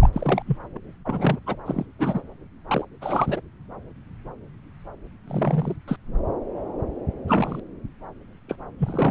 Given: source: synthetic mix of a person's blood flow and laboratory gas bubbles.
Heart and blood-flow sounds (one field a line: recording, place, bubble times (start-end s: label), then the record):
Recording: Doppler ultrasound of blood flow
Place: subclavian vein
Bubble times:
0.00-0.10 s: bubbles
0.13-0.42 s: bubbles
0.47-0.57 s: bubbles
0.75-0.77 s: bubbles
1.05-1.40 s: bubbles
1.46-1.56 s: bubbles
1.66-1.86 s: bubbles
1.99-2.21 s: bubbles
2.67-2.85 s: bubbles
3.01-3.40 s: bubbles
5.28-5.76 s: bubbles
5.88-5.96 s: bubbles
7.28-7.60 s: bubbles
8.48-8.55 s: bubbles
8.79-9.11 s: bubbles
From the record:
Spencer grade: 3 (all of the cardiac periods contain showers or single bubble signals, but not dominating or overriding the cardiac motion signals)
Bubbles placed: anywhere in the cardiac cycle